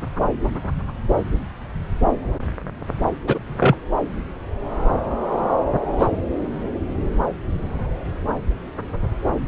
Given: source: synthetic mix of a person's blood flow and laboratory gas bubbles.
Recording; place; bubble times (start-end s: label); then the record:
Doppler ultrasound of blood flow; subclavian vein
3.27-3.38 s: bubbles
3.59-3.75 s: bubbles
6.00-6.08 s: bubbles
From the record:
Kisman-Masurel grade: 123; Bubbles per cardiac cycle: 1 to 2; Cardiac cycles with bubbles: 10 to 50%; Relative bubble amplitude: loud (0.450 to 0.775); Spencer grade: 2 (many but less than half of the cardiac periods contain bubble signals, singularly or in groups); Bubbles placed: anywhere in the cardiac cycle